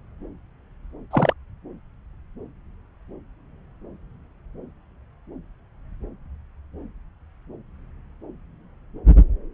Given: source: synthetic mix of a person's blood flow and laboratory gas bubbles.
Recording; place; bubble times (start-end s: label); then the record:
Doppler ultrasound of blood flow; subclavian vein
1.10-1.33 s: bubbles
From the record:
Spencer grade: 1 (occasional bubble signal discernible with the cardiac motion signal, with majority of cardiac periods free of bubbles); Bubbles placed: anywhere in the cardiac cycle